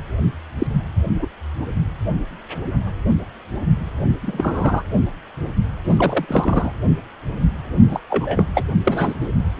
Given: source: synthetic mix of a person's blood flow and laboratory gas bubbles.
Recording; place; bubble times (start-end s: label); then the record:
Doppler ultrasound of blood flow; precordium
0.58-0.67 s: bubbles
1.19-1.27 s: bubbles
4.22-4.83 s: bubbles
5.84-6.72 s: bubbles
7.88-8.00 s: bubbles
8.10-8.46 s: bubbles
8.55-8.62 s: bubbles
8.83-9.29 s: bubbles
9.57-9.60 s: bubbles
From the record:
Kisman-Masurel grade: 232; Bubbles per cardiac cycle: several, 3 to 8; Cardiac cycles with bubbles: 50 to 99%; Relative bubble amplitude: moderate (0.250 to 0.450); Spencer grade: 3 (all of the cardiac periods contain showers or single bubble signals, but not dominating or overriding the cardiac motion signals); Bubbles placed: anywhere in the cardiac cycle